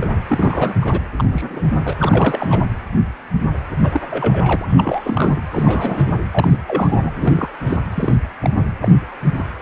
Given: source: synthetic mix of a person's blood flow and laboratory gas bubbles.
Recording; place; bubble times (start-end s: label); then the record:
Doppler ultrasound of blood flow; precordium
0.00-0.11 s: bubbles
0.28-0.73 s: bubbles
0.82-1.00 s: bubbles
1.17-1.68 s: bubbles
1.84-1.94 s: bubbles
1.98-2.63 s: bubbles
3.82-4.01 s: bubbles
4.11-4.66 s: bubbles
4.70-5.42 s: bubbles
5.52-6.20 s: bubbles
6.31-6.58 s: bubbles
6.67-7.12 s: bubbles
7.16-7.48 s: bubbles
7.66-7.78 s: bubbles
7.94-8.16 s: bubbles
8.40-8.50 s: bubbles
8.54-8.65 s: bubbles
8.81-8.94 s: bubbles
9.38-9.43 s: bubbles
From the record:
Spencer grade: 3 (all of the cardiac periods contain showers or single bubble signals, but not dominating or overriding the cardiac motion signals); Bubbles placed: anywhere in the cardiac cycle